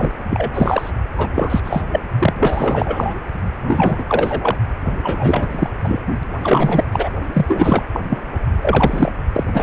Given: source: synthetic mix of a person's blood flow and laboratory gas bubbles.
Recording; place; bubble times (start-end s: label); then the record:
Doppler ultrasound of blood flow; precordium
0.00-0.12 s: bubbles
0.30-0.50 s: bubbles
0.54-0.90 s: bubbles
1.17-1.28 s: bubbles
1.32-1.60 s: bubbles
1.64-1.82 s: bubbles
1.92-2.00 s: bubbles
2.19-2.33 s: bubbles
2.40-3.14 s: bubbles
3.68-4.04 s: bubbles
4.08-4.57 s: bubbles
4.85-4.96 s: bubbles
5.03-5.47 s: bubbles
5.51-5.70 s: bubbles
5.83-6.02 s: bubbles
6.43-6.84 s: bubbles
6.92-7.09 s: bubbles
7.33-7.46 s: bubbles
7.48-7.83 s: bubbles
7.93-8.00 s: bubbles
8.09-8.19 s: bubbles
8.62-9.11 s: bubbles
9.33-9.44 s: bubbles
9.54-9.63 s: bubbles
From the record:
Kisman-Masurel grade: 343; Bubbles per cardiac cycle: rolling drumbeat, 9 or more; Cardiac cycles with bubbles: 100%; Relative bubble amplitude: loud (0.450 to 0.775); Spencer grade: 3 (all of the cardiac periods contain showers or single bubble signals, but not dominating or overriding the cardiac motion signals); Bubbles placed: only in the low amplitude regions of the cardiac cycle